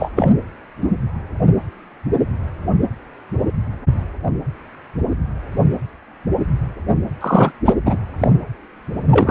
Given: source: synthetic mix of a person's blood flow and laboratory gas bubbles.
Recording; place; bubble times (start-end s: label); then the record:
Doppler ultrasound of blood flow; precordium
0.00-0.11 s: bubbles
0.15-0.31 s: bubbles
7.21-7.52 s: bubbles
7.65-7.74 s: bubbles
7.85-7.99 s: bubbles
8.18-8.31 s: bubbles
9.11-9.31 s: bubbles
From the record:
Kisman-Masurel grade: 223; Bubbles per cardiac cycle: several, 3 to 8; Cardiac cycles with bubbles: 10 to 50%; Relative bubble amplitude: loud (0.450 to 0.775); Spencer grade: 2 (many but less than half of the cardiac periods contain bubble signals, singularly or in groups); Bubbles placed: anywhere in the cardiac cycle